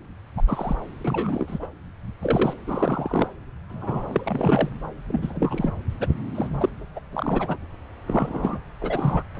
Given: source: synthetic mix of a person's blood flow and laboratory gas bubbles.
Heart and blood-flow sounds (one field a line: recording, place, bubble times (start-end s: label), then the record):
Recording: Doppler ultrasound of blood flow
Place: subclavian vein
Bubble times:
0.36-0.42 s: bubbles
0.47-0.75 s: bubbles
1.04-1.68 s: bubbles
2.21-2.54 s: bubbles
2.66-3.32 s: bubbles
3.69-4.68 s: bubbles
5.07-5.71 s: bubbles
5.91-5.93 s: bubbles
6.00-6.07 s: bubbles
6.34-6.47 s: bubbles
6.60-6.69 s: bubbles
6.96-7.00 s: bubbles
7.13-7.57 s: bubbles
8.06-8.58 s: bubbles
8.81-9.23 s: bubbles
9.35-9.40 s: bubbles
From the record:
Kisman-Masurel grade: 242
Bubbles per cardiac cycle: several, 3 to 8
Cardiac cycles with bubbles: 100%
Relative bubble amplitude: moderate (0.250 to 0.450)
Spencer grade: 3 (all of the cardiac periods contain showers or single bubble signals, but not dominating or overriding the cardiac motion signals)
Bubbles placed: anywhere in the cardiac cycle